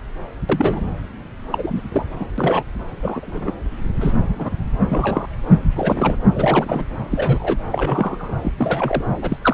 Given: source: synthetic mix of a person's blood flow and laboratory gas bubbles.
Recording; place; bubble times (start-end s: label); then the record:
Doppler ultrasound of blood flow; subclavian vein
0.49-0.81 s: bubbles
1.52-1.81 s: bubbles
1.92-2.06 s: bubbles
2.19-2.25 s: bubbles
2.38-2.63 s: bubbles
3.02-3.53 s: bubbles
4.00-4.13 s: bubbles
4.38-4.50 s: bubbles
4.89-5.27 s: bubbles
5.75-6.16 s: bubbles
6.36-6.83 s: bubbles
7.11-7.57 s: bubbles
7.71-8.35 s: bubbles
8.42-8.52 s: bubbles
8.57-9.04 s: bubbles
9.21-9.38 s: bubbles
9.42-9.53 s: bubbles
From the record:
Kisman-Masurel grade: 242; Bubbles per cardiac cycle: several, 3 to 8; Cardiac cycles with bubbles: 100%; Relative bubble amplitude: moderate (0.250 to 0.450); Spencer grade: 3 (all of the cardiac periods contain showers or single bubble signals, but not dominating or overriding the cardiac motion signals); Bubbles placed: anywhere in the cardiac cycle